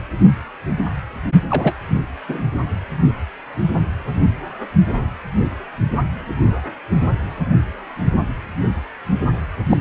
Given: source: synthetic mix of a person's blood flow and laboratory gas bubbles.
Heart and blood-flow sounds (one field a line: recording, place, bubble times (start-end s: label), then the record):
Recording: Doppler ultrasound of blood flow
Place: precordium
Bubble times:
1.49-1.75 s: bubbles
2.29-2.44 s: bubbles
9.69-9.79 s: bubbles
From the record:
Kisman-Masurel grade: 222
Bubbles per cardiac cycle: several, 3 to 8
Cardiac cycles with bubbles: 10 to 50%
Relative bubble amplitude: moderate (0.250 to 0.450)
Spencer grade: 2 (many but less than half of the cardiac periods contain bubble signals, singularly or in groups)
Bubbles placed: anywhere in the cardiac cycle